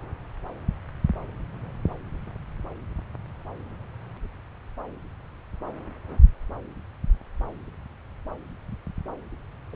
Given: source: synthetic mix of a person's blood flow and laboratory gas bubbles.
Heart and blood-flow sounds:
Doppler ultrasound of blood flow; subclavian vein
9.73-9.76 s: bubbles
From the record:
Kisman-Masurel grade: 111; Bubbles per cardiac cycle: 1 to 2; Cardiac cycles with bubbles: 1 to 10%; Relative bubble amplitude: barely perceptible (0.100 to 0.250); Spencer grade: 1 (occasional bubble signal discernible with the cardiac motion signal, with majority of cardiac periods free of bubbles); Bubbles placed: anywhere in the cardiac cycle

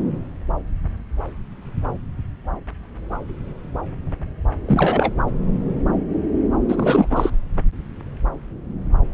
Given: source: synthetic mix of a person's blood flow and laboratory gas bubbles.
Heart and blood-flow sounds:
Doppler ultrasound of blood flow; subclavian vein
4.67-5.12 s: bubbles
6.68-7.06 s: bubbles
7.10-7.30 s: bubbles
From the record:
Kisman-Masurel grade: 223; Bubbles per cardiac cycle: several, 3 to 8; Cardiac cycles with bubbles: 10 to 50%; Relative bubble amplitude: loud (0.450 to 0.775); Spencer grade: 2 (many but less than half of the cardiac periods contain bubble signals, singularly or in groups); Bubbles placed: anywhere in the cardiac cycle

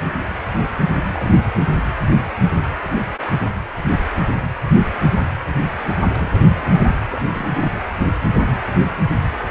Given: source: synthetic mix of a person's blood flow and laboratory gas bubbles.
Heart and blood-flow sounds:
Doppler ultrasound of blood flow; precordium
0.96-1.31 s: bubbles
6.06-6.99 s: bubbles
7.09-7.21 s: bubbles
7.24-7.71 s: bubbles
From the record:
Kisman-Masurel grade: 221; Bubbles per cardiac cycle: several, 3 to 8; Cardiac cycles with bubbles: 10 to 50%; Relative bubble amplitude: barely perceptible (0.100 to 0.250); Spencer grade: 2 (many but less than half of the cardiac periods contain bubble signals, singularly or in groups); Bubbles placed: anywhere in the cardiac cycle

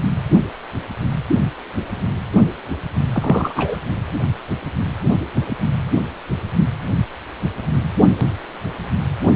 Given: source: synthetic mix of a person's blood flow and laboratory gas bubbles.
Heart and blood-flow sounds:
Doppler ultrasound of blood flow; precordium
3.14-3.77 s: bubbles
From the record:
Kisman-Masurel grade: 223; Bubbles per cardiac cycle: several, 3 to 8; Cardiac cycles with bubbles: 10 to 50%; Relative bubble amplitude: loud (0.450 to 0.775); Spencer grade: 2 (many but less than half of the cardiac periods contain bubble signals, singularly or in groups); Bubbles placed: anywhere in the cardiac cycle

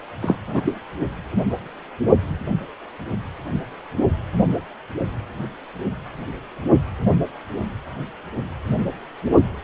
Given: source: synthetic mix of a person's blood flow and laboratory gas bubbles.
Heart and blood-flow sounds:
Doppler ultrasound of blood flow; precordium
0.21-0.36 s: bubbles
0.47-0.61 s: bubbles
0.64-0.74 s: bubbles
From the record:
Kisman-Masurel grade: 212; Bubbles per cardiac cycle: several, 3 to 8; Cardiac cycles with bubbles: 1 to 10%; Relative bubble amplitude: moderate (0.250 to 0.450); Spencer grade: 1 (occasional bubble signal discernible with the cardiac motion signal, with majority of cardiac periods free of bubbles); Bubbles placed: only in the low amplitude regions of the cardiac cycle

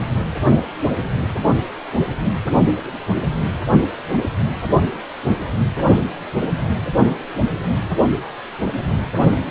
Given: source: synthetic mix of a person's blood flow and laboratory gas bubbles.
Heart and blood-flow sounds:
Doppler ultrasound of blood flow; precordium
no bubbles
From the record:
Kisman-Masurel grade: 000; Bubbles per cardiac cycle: 0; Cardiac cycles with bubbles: 0%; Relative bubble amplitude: no bubbles discernible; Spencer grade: 0 (complete lack of bubble signals)

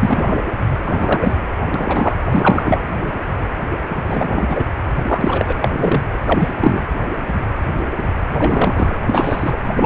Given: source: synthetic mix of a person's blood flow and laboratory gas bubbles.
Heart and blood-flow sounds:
Doppler ultrasound of blood flow; precordium
0.00-0.36 s: bubbles
0.85-1.36 s: bubbles
1.74-2.14 s: bubbles
2.31-2.82 s: bubbles
4.07-4.63 s: bubbles
5.08-5.52 s: bubbles
5.60-5.68 s: bubbles
5.77-6.04 s: bubbles
6.25-6.54 s: bubbles
6.59-6.84 s: bubbles
8.38-8.98 s: bubbles
9.07-9.58 s: bubbles
9.76-9.86 s: bubbles
From the record:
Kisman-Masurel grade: 233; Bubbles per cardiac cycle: several, 3 to 8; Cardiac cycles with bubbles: 50 to 99%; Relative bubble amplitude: loud (0.450 to 0.775); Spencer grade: 3 (all of the cardiac periods contain showers or single bubble signals, but not dominating or overriding the cardiac motion signals); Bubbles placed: anywhere in the cardiac cycle

